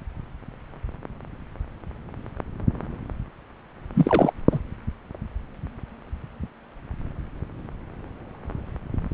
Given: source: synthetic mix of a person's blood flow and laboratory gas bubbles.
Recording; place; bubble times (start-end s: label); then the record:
Doppler ultrasound of blood flow; subclavian vein
3.95-4.33 s: bubbles
4.50-4.59 s: bubbles
From the record:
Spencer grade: 1 (occasional bubble signal discernible with the cardiac motion signal, with majority of cardiac periods free of bubbles); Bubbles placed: anywhere in the cardiac cycle